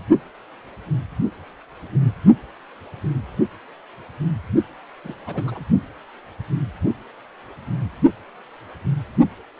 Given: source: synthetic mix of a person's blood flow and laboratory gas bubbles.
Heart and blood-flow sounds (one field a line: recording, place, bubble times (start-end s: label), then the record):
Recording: Doppler ultrasound of blood flow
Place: precordium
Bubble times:
5.04-5.14 s: bubbles
5.27-5.65 s: bubbles
From the record:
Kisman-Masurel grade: 211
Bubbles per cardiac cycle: several, 3 to 8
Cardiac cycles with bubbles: 1 to 10%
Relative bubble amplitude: barely perceptible (0.100 to 0.250)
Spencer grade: 1 (occasional bubble signal discernible with the cardiac motion signal, with majority of cardiac periods free of bubbles)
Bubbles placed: only in the low amplitude regions of the cardiac cycle